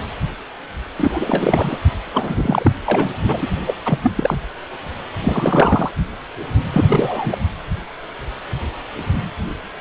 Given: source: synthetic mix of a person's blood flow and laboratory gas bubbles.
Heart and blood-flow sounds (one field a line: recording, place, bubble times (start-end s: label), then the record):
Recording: Doppler ultrasound of blood flow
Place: precordium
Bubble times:
0.97-1.78 s: bubbles
2.12-2.71 s: bubbles
2.85-3.11 s: bubbles
3.27-3.48 s: bubbles
3.67-3.74 s: bubbles
3.85-3.98 s: bubbles
4.03-4.12 s: bubbles
4.17-4.37 s: bubbles
5.21-5.91 s: bubbles
6.73-7.38 s: bubbles
From the record:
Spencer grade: 3 (all of the cardiac periods contain showers or single bubble signals, but not dominating or overriding the cardiac motion signals)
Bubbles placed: anywhere in the cardiac cycle